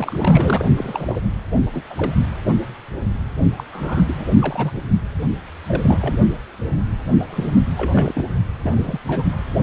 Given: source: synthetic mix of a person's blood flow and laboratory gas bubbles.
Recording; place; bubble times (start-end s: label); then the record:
Doppler ultrasound of blood flow; precordium
0.00-0.65 s: bubbles
0.76-1.35 s: bubbles
1.72-1.84 s: bubbles
1.90-2.15 s: bubbles
3.56-3.64 s: bubbles
3.72-4.26 s: bubbles
4.39-4.72 s: bubbles
5.67-6.18 s: bubbles
7.19-7.25 s: bubbles
7.29-7.58 s: bubbles
7.77-8.25 s: bubbles
8.62-8.99 s: bubbles
9.07-9.28 s: bubbles
From the record:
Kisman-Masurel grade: 232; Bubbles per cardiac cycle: several, 3 to 8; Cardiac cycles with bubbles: 50 to 99%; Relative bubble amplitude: moderate (0.250 to 0.450); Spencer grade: 3 (all of the cardiac periods contain showers or single bubble signals, but not dominating or overriding the cardiac motion signals); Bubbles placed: only in the low amplitude regions of the cardiac cycle